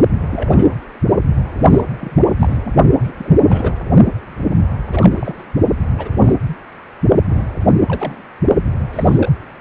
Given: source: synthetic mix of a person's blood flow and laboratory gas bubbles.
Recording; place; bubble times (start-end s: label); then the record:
Doppler ultrasound of blood flow; precordium
0.20-0.75 s: bubbles
1.29-1.84 s: bubbles
2.00-2.23 s: bubbles
2.39-2.72 s: bubbles
3.02-3.12 s: bubbles
3.18-3.33 s: bubbles
3.44-3.75 s: bubbles
4.91-5.45 s: bubbles
5.98-6.42 s: bubbles
6.47-6.57 s: bubbles
7.29-7.45 s: bubbles
7.86-8.22 s: bubbles
8.92-9.32 s: bubbles
From the record:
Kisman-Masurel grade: 242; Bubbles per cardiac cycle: several, 3 to 8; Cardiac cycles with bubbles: 100%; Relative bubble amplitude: moderate (0.250 to 0.450); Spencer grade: 3 (all of the cardiac periods contain showers or single bubble signals, but not dominating or overriding the cardiac motion signals); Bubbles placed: only in the low amplitude regions of the cardiac cycle